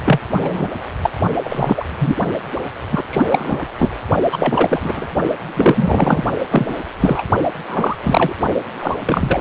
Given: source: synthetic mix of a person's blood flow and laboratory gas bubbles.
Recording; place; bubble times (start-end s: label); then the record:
Doppler ultrasound of blood flow; precordium
0.05-0.20 s: bubbles
0.32-0.68 s: bubbles
1.02-1.09 s: bubbles
1.45-1.85 s: bubbles
1.99-2.15 s: bubbles
2.91-3.04 s: bubbles
3.10-3.26 s: bubbles
3.29-3.65 s: bubbles
3.77-3.88 s: bubbles
4.31-5.07 s: bubbles
5.54-6.23 s: bubbles
6.51-6.73 s: bubbles
7.00-7.22 s: bubbles
7.67-7.96 s: bubbles
8.03-8.36 s: bubbles
8.81-8.97 s: bubbles
9.06-9.41 s: bubbles
From the record:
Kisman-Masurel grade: 243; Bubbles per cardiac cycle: several, 3 to 8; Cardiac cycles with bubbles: 100%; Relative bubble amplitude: loud (0.450 to 0.775); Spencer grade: 3 (all of the cardiac periods contain showers or single bubble signals, but not dominating or overriding the cardiac motion signals); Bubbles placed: only in the low amplitude regions of the cardiac cycle